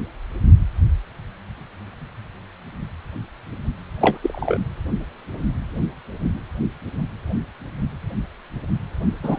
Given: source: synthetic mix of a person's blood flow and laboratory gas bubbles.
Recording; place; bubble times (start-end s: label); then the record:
Doppler ultrasound of blood flow; precordium
4.01-4.18 s: bubbles
4.22-4.58 s: bubbles
9.22-9.39 s: bubbles
From the record:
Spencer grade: 2 (many but less than half of the cardiac periods contain bubble signals, singularly or in groups); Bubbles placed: anywhere in the cardiac cycle